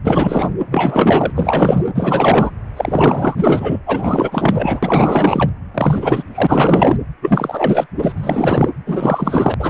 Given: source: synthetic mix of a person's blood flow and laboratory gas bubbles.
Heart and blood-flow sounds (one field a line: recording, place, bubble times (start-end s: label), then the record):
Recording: Doppler ultrasound of blood flow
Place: precordium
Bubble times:
0.04-0.54 s: bubbles
0.71-1.31 s: bubbles
1.35-1.84 s: bubbles
1.95-2.51 s: bubbles
2.77-3.79 s: bubbles
3.86-4.80 s: bubbles
4.83-5.52 s: bubbles
5.74-6.23 s: bubbles
6.34-6.97 s: bubbles
7.21-7.86 s: bubbles
8.02-8.69 s: bubbles
8.86-9.54 s: bubbles
9.60-9.70 s: bubbles
From the record:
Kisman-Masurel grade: 444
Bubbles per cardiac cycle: continuous sound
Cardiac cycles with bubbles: 100%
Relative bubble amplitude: maximal (0.775 to 0.999)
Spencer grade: 4 (maximum detectable bubble signal sounding continuously throughout systole and diastole of every cardiac period, and overriding the amplitude of the normal cardiac signals)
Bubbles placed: anywhere in the cardiac cycle